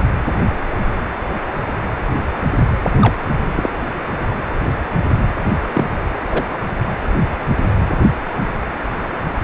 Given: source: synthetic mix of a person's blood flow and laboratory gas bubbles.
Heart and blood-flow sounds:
Doppler ultrasound of blood flow; precordium
3.01-3.15 s: bubbles
3.55-3.69 s: bubbles
5.73-5.85 s: bubbles
6.29-6.45 s: bubbles
From the record:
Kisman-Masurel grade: 123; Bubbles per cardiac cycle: 1 to 2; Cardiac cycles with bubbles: 10 to 50%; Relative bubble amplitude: loud (0.450 to 0.775); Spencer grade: 2 (many but less than half of the cardiac periods contain bubble signals, singularly or in groups); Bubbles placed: anywhere in the cardiac cycle

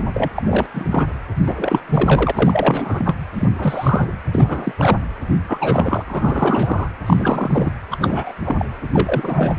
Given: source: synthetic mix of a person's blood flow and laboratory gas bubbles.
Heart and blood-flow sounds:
Doppler ultrasound of blood flow; precordium
0.00-0.04 s: bubbles
0.14-0.28 s: bubbles
0.34-0.43 s: bubbles
0.45-0.66 s: bubbles
0.73-1.06 s: bubbles
1.46-1.81 s: bubbles
1.89-2.31 s: bubbles
2.34-3.17 s: bubbles
3.35-3.49 s: bubbles
3.52-4.09 s: bubbles
4.33-4.72 s: bubbles
4.78-4.98 s: bubbles
5.46-6.04 s: bubbles
6.07-6.87 s: bubbles
7.06-7.73 s: bubbles
7.87-8.32 s: bubbles
8.44-8.65 s: bubbles
8.93-9.55 s: bubbles
From the record:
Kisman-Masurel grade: 343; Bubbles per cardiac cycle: rolling drumbeat, 9 or more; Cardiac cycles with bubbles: 100%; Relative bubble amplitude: loud (0.450 to 0.775); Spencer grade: 3 (all of the cardiac periods contain showers or single bubble signals, but not dominating or overriding the cardiac motion signals); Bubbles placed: anywhere in the cardiac cycle

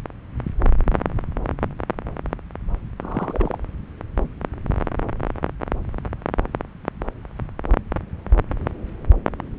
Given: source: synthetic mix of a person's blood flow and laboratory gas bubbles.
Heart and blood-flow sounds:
Doppler ultrasound of blood flow; subclavian vein
3.01-3.58 s: bubbles
From the record:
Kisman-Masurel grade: 211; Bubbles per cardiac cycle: several, 3 to 8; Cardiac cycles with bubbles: 1 to 10%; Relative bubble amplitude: barely perceptible (0.100 to 0.250); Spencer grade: 1 (occasional bubble signal discernible with the cardiac motion signal, with majority of cardiac periods free of bubbles); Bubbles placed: anywhere in the cardiac cycle

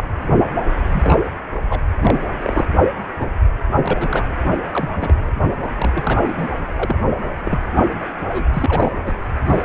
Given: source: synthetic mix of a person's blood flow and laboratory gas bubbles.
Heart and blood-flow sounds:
Doppler ultrasound of blood flow; precordium
0.00-0.04 s: bubbles
0.92-1.22 s: bubbles
1.69-1.81 s: bubbles
2.01-2.25 s: bubbles
2.39-2.69 s: bubbles
3.19-3.26 s: bubbles
3.85-4.25 s: bubbles
4.72-5.32 s: bubbles
5.75-6.50 s: bubbles
6.76-6.96 s: bubbles
7.41-7.59 s: bubbles
7.72-8.08 s: bubbles
8.28-8.47 s: bubbles
8.54-8.92 s: bubbles
9.06-9.12 s: bubbles
9.47-9.64 s: bubbles
From the record:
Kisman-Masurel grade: 242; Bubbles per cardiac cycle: several, 3 to 8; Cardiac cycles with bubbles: 100%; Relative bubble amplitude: moderate (0.250 to 0.450); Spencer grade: 3 (all of the cardiac periods contain showers or single bubble signals, but not dominating or overriding the cardiac motion signals); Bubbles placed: anywhere in the cardiac cycle

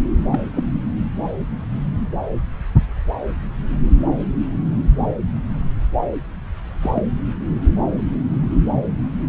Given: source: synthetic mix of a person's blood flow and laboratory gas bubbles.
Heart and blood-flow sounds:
Doppler ultrasound of blood flow; subclavian vein
0.32-0.40 s: bubbles
0.54-0.64 s: bubbles
6.81-7.03 s: bubbles
From the record:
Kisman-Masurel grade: 122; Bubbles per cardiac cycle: 1 to 2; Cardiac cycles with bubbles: 10 to 50%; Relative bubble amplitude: moderate (0.250 to 0.450); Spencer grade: 2 (many but less than half of the cardiac periods contain bubble signals, singularly or in groups); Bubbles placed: anywhere in the cardiac cycle

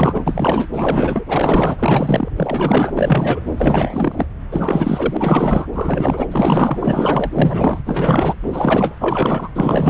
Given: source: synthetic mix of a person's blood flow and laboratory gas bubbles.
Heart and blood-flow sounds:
Doppler ultrasound of blood flow; subclavian vein
0.00-0.67 s: bubbles
0.73-1.24 s: bubbles
1.28-1.75 s: bubbles
1.78-2.29 s: bubbles
2.36-2.94 s: bubbles
2.97-3.41 s: bubbles
3.58-4.26 s: bubbles
4.51-5.67 s: bubbles
5.73-6.27 s: bubbles
6.32-7.83 s: bubbles
7.86-8.35 s: bubbles
8.42-8.50 s: bubbles
8.53-8.96 s: bubbles
9.00-9.51 s: bubbles
9.54-9.90 s: bubbles
From the record:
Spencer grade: 4 (maximum detectable bubble signal sounding continuously throughout systole and diastole of every cardiac period, and overriding the amplitude of the normal cardiac signals); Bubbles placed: anywhere in the cardiac cycle

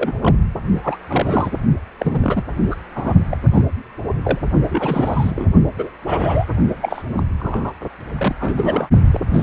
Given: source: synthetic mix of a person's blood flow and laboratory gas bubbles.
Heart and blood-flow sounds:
Doppler ultrasound of blood flow; precordium
0.00-0.16 s: bubbles
0.21-0.35 s: bubbles
0.83-0.97 s: bubbles
1.09-1.50 s: bubbles
1.99-2.42 s: bubbles
2.70-2.75 s: bubbles
2.95-3.13 s: bubbles
3.30-3.38 s: bubbles
3.53-3.62 s: bubbles
4.23-4.38 s: bubbles
4.69-5.46 s: bubbles
5.78-5.89 s: bubbles
6.06-6.46 s: bubbles
6.81-7.02 s: bubbles
7.17-7.23 s: bubbles
7.39-7.73 s: bubbles
8.18-8.36 s: bubbles
8.39-8.88 s: bubbles
9.13-9.20 s: bubbles
9.33-9.43 s: bubbles
From the record:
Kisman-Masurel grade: 242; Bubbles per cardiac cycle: several, 3 to 8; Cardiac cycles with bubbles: 100%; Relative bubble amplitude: moderate (0.250 to 0.450); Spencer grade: 3 (all of the cardiac periods contain showers or single bubble signals, but not dominating or overriding the cardiac motion signals); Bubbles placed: only in the low amplitude regions of the cardiac cycle

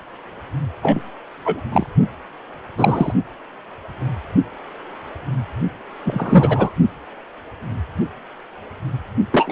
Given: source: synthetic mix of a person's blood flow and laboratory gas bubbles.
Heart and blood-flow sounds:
Doppler ultrasound of blood flow; precordium
0.82-1.00 s: bubbles
1.45-1.60 s: bubbles
1.72-1.87 s: bubbles
2.77-3.13 s: bubbles
6.04-6.71 s: bubbles
9.32-9.52 s: bubbles
From the record:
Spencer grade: 3 (all of the cardiac periods contain showers or single bubble signals, but not dominating or overriding the cardiac motion signals); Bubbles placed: only in the low amplitude regions of the cardiac cycle

